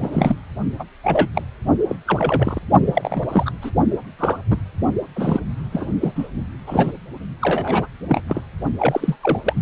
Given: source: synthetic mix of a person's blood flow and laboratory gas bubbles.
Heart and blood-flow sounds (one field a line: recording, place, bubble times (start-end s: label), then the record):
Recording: Doppler ultrasound of blood flow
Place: precordium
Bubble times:
0.00-0.35 s: bubbles
0.78-0.83 s: bubbles
1.03-1.29 s: bubbles
1.35-1.43 s: bubbles
1.88-1.96 s: bubbles
2.06-2.60 s: bubbles
2.86-3.52 s: bubbles
3.62-3.71 s: bubbles
4.18-4.39 s: bubbles
4.50-4.56 s: bubbles
5.15-5.40 s: bubbles
5.72-5.87 s: bubbles
6.00-6.12 s: bubbles
6.15-6.28 s: bubbles
6.67-6.92 s: bubbles
7.41-7.86 s: bubbles
8.08-8.22 s: bubbles
8.28-8.42 s: bubbles
8.79-9.17 s: bubbles
9.23-9.39 s: bubbles
9.46-9.54 s: bubbles
From the record:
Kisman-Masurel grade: 242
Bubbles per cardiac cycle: several, 3 to 8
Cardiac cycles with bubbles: 100%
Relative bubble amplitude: moderate (0.250 to 0.450)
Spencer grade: 3 (all of the cardiac periods contain showers or single bubble signals, but not dominating or overriding the cardiac motion signals)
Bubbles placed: only in the low amplitude regions of the cardiac cycle